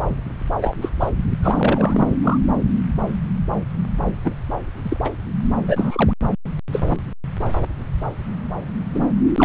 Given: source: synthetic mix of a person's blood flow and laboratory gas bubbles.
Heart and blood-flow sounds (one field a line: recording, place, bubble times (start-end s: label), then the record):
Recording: Doppler ultrasound of blood flow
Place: subclavian vein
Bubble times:
0.60-0.74 s: bubbles
0.82-0.89 s: bubbles
1.00-1.11 s: bubbles
1.42-2.17 s: bubbles
2.23-2.38 s: bubbles
4.24-4.35 s: bubbles
4.82-4.97 s: bubbles
5.04-5.10 s: bubbles
5.67-6.12 s: bubbles
6.72-6.83 s: bubbles
6.86-7.01 s: bubbles
8.94-9.00 s: bubbles
9.38-9.45 s: bubbles
From the record:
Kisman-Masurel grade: 233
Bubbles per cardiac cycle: several, 3 to 8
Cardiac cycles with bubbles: 50 to 99%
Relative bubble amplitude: loud (0.450 to 0.775)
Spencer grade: 3 (all of the cardiac periods contain showers or single bubble signals, but not dominating or overriding the cardiac motion signals)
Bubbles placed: anywhere in the cardiac cycle